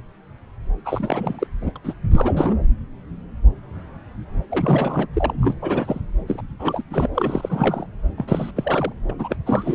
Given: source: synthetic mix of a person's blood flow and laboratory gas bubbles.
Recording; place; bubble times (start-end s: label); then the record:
Doppler ultrasound of blood flow; subclavian vein
0.84-1.47 s: bubbles
1.61-1.71 s: bubbles
1.75-1.78 s: bubbles
1.83-1.93 s: bubbles
2.11-2.55 s: bubbles
4.50-5.06 s: bubbles
5.13-5.33 s: bubbles
5.40-5.55 s: bubbles
5.61-6.00 s: bubbles
6.27-6.41 s: bubbles
6.59-6.82 s: bubbles
6.89-7.08 s: bubbles
7.14-7.86 s: bubbles
8.17-8.51 s: bubbles
8.55-8.93 s: bubbles
9.09-9.14 s: bubbles
9.19-9.36 s: bubbles
9.46-9.75 s: bubbles
From the record:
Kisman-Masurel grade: 332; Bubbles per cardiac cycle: rolling drumbeat, 9 or more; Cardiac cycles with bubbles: 50 to 99%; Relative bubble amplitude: moderate (0.250 to 0.450); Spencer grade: 3 (all of the cardiac periods contain showers or single bubble signals, but not dominating or overriding the cardiac motion signals); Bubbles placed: anywhere in the cardiac cycle